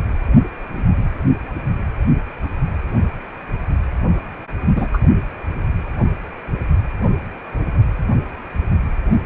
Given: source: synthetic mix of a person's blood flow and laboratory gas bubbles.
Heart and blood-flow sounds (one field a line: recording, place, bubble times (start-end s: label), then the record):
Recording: Doppler ultrasound of blood flow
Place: precordium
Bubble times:
4.76-4.88 s: bubbles
4.94-4.98 s: bubbles
From the record:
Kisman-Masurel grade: 113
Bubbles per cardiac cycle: 1 to 2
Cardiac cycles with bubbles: 1 to 10%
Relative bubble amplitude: loud (0.450 to 0.775)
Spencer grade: 1 (occasional bubble signal discernible with the cardiac motion signal, with majority of cardiac periods free of bubbles)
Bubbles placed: only in the low amplitude regions of the cardiac cycle